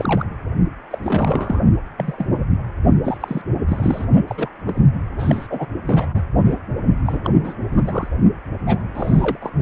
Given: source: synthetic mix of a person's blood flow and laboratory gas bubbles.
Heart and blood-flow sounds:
Doppler ultrasound of blood flow; precordium
0.00-0.27 s: bubbles
0.91-0.98 s: bubbles
1.03-1.64 s: bubbles
1.97-2.43 s: bubbles
3.03-3.17 s: bubbles
3.20-3.42 s: bubbles
3.68-4.06 s: bubbles
4.28-4.49 s: bubbles
4.67-4.85 s: bubbles
5.19-5.47 s: bubbles
5.50-5.67 s: bubbles
5.87-6.21 s: bubbles
6.36-6.56 s: bubbles
7.05-7.21 s: bubbles
7.24-7.31 s: bubbles
7.44-7.54 s: bubbles
7.71-8.09 s: bubbles
8.66-8.83 s: bubbles
8.94-9.38 s: bubbles
9.41-9.50 s: bubbles
From the record:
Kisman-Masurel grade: 242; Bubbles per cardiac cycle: several, 3 to 8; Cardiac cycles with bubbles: 100%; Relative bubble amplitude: moderate (0.250 to 0.450); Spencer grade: 3 (all of the cardiac periods contain showers or single bubble signals, but not dominating or overriding the cardiac motion signals); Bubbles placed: only in the low amplitude regions of the cardiac cycle

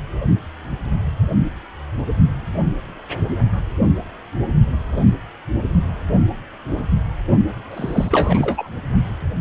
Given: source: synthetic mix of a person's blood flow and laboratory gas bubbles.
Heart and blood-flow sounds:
Doppler ultrasound of blood flow; precordium
7.70-8.70 s: bubbles
From the record:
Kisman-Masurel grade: 212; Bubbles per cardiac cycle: several, 3 to 8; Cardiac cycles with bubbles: 1 to 10%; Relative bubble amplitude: moderate (0.250 to 0.450); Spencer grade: 1 (occasional bubble signal discernible with the cardiac motion signal, with majority of cardiac periods free of bubbles); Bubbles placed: only in the low amplitude regions of the cardiac cycle

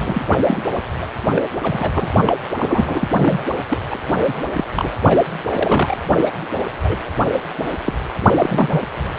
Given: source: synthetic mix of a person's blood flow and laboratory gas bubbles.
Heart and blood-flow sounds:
Doppler ultrasound of blood flow; precordium
0.00-0.24 s: bubbles
0.26-0.36 s: bubbles
0.47-0.61 s: bubbles
0.73-0.81 s: bubbles
1.01-1.06 s: bubbles
1.35-1.42 s: bubbles
1.61-2.10 s: bubbles
2.16-2.33 s: bubbles
2.58-3.09 s: bubbles
3.16-3.43 s: bubbles
3.69-3.78 s: bubbles
3.91-3.98 s: bubbles
4.27-4.43 s: bubbles
4.54-4.65 s: bubbles
4.73-4.96 s: bubbles
5.04-5.19 s: bubbles
5.50-5.98 s: bubbles
6.25-6.30 s: bubbles
6.83-6.97 s: bubbles
7.58-7.66 s: bubbles
7.85-7.93 s: bubbles
8.19-8.33 s: bubbles
8.39-8.80 s: bubbles
From the record:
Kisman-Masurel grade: 242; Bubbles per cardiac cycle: several, 3 to 8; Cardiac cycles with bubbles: 100%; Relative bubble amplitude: moderate (0.250 to 0.450); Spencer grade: 3 (all of the cardiac periods contain showers or single bubble signals, but not dominating or overriding the cardiac motion signals); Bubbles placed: anywhere in the cardiac cycle

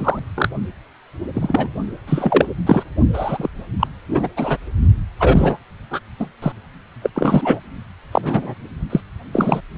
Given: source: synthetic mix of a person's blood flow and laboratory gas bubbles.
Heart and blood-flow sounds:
Doppler ultrasound of blood flow; precordium
0.00-0.20 s: bubbles
0.35-0.49 s: bubbles
1.34-1.71 s: bubbles
2.06-2.46 s: bubbles
2.66-2.83 s: bubbles
3.13-3.49 s: bubbles
3.79-3.87 s: bubbles
4.08-4.28 s: bubbles
4.36-4.57 s: bubbles
5.19-5.58 s: bubbles
5.90-6.00 s: bubbles
6.19-6.26 s: bubbles
6.42-6.52 s: bubbles
7.01-7.10 s: bubbles
7.15-7.59 s: bubbles
8.12-8.54 s: bubbles
8.89-9.00 s: bubbles
9.32-9.61 s: bubbles
From the record:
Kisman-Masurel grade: 233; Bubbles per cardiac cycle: several, 3 to 8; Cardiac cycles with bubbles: 50 to 99%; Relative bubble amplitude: loud (0.450 to 0.775); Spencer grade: 3 (all of the cardiac periods contain showers or single bubble signals, but not dominating or overriding the cardiac motion signals); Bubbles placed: only in the low amplitude regions of the cardiac cycle

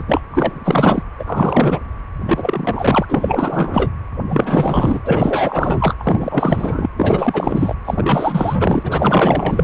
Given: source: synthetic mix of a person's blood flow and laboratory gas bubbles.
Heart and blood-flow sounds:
Doppler ultrasound of blood flow; precordium
0.00-0.04 s: bubbles
0.08-0.21 s: bubbles
0.31-1.03 s: bubbles
1.19-1.79 s: bubbles
2.28-3.06 s: bubbles
3.08-3.91 s: bubbles
4.29-5.94 s: bubbles
5.99-6.90 s: bubbles
6.96-7.75 s: bubbles
7.85-9.64 s: bubbles
From the record:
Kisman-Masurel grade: 444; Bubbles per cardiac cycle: continuous sound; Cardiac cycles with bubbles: 100%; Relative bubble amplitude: maximal (0.775 to 0.999); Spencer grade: 4 (maximum detectable bubble signal sounding continuously throughout systole and diastole of every cardiac period, and overriding the amplitude of the normal cardiac signals); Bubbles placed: anywhere in the cardiac cycle

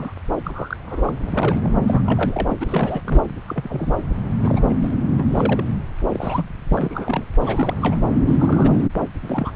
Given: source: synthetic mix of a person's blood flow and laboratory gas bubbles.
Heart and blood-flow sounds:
Doppler ultrasound of blood flow; subclavian vein
0.00-0.13 s: bubbles
0.44-0.77 s: bubbles
0.86-1.74 s: bubbles
1.88-2.02 s: bubbles
2.05-3.02 s: bubbles
3.04-3.23 s: bubbles
3.48-3.95 s: bubbles
4.38-4.61 s: bubbles
4.69-4.77 s: bubbles
4.81-5.24 s: bubbles
5.29-5.64 s: bubbles
5.99-6.46 s: bubbles
6.69-7.24 s: bubbles
7.40-7.98 s: bubbles
8.27-8.85 s: bubbles
8.99-9.07 s: bubbles
9.22-9.51 s: bubbles
From the record:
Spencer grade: 3 (all of the cardiac periods contain showers or single bubble signals, but not dominating or overriding the cardiac motion signals); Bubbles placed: anywhere in the cardiac cycle

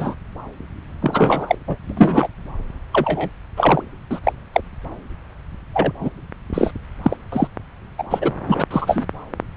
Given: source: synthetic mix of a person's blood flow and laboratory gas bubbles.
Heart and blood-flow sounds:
Doppler ultrasound of blood flow; subclavian vein
0.00-0.15 s: bubbles
1.01-1.55 s: bubbles
1.67-1.77 s: bubbles
1.89-1.93 s: bubbles
1.97-2.28 s: bubbles
2.93-3.29 s: bubbles
3.56-3.83 s: bubbles
4.11-4.20 s: bubbles
4.24-4.33 s: bubbles
4.53-4.61 s: bubbles
5.73-5.92 s: bubbles
6.00-6.10 s: bubbles
6.53-6.71 s: bubbles
7.03-7.17 s: bubbles
7.32-7.48 s: bubbles
7.98-8.04 s: bubbles
8.10-8.31 s: bubbles
8.47-8.64 s: bubbles
8.71-9.05 s: bubbles
From the record:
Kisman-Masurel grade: 243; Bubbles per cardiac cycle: several, 3 to 8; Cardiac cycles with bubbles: 100%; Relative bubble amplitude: loud (0.450 to 0.775); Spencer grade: 3 (all of the cardiac periods contain showers or single bubble signals, but not dominating or overriding the cardiac motion signals); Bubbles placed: anywhere in the cardiac cycle

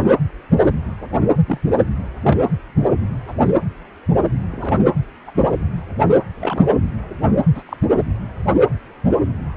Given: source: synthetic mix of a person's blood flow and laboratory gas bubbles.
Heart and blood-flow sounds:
Doppler ultrasound of blood flow; precordium
1.47-1.58 s: bubbles
2.23-2.39 s: bubbles
3.27-3.34 s: bubbles
4.52-4.79 s: bubbles
5.27-5.31 s: bubbles
6.35-6.75 s: bubbles
7.55-7.62 s: bubbles
7.66-7.77 s: bubbles
From the record:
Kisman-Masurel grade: 122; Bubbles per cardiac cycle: 1 to 2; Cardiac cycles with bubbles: 10 to 50%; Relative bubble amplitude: moderate (0.250 to 0.450); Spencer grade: 2 (many but less than half of the cardiac periods contain bubble signals, singularly or in groups); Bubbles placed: anywhere in the cardiac cycle

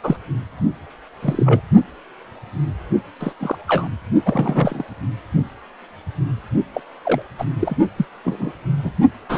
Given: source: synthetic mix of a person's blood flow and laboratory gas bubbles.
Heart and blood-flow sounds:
Doppler ultrasound of blood flow; precordium
0.04-0.17 s: bubbles
1.22-1.61 s: bubbles
3.20-3.34 s: bubbles
3.39-3.55 s: bubbles
3.67-3.89 s: bubbles
4.25-4.83 s: bubbles
6.74-6.81 s: bubbles
7.04-7.22 s: bubbles
7.39-7.45 s: bubbles
7.59-7.76 s: bubbles
7.96-8.05 s: bubbles
8.24-8.52 s: bubbles
8.82-8.92 s: bubbles
9.29-9.38 s: bubbles
From the record:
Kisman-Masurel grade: 232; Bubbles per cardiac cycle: several, 3 to 8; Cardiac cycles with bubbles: 50 to 99%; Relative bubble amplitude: moderate (0.250 to 0.450); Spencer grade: 3 (all of the cardiac periods contain showers or single bubble signals, but not dominating or overriding the cardiac motion signals); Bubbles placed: only in the low amplitude regions of the cardiac cycle

